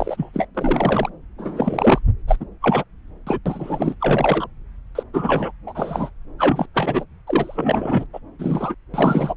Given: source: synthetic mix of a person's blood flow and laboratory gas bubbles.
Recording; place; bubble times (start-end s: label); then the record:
Doppler ultrasound of blood flow; subclavian vein
0.00-0.47 s: bubbles
0.55-1.09 s: bubbles
1.38-1.99 s: bubbles
2.27-2.37 s: bubbles
2.40-2.46 s: bubbles
2.62-2.84 s: bubbles
3.27-3.39 s: bubbles
3.46-3.96 s: bubbles
4.00-4.47 s: bubbles
4.95-5.03 s: bubbles
5.13-5.51 s: bubbles
5.67-6.11 s: bubbles
6.38-6.68 s: bubbles
6.74-7.05 s: bubbles
7.27-8.06 s: bubbles
8.13-8.19 s: bubbles
8.39-8.74 s: bubbles
8.93-9.34 s: bubbles
From the record:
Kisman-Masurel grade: 243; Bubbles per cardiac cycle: several, 3 to 8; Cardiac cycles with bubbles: 100%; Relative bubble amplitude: loud (0.450 to 0.775); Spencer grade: 3 (all of the cardiac periods contain showers or single bubble signals, but not dominating or overriding the cardiac motion signals); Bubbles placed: anywhere in the cardiac cycle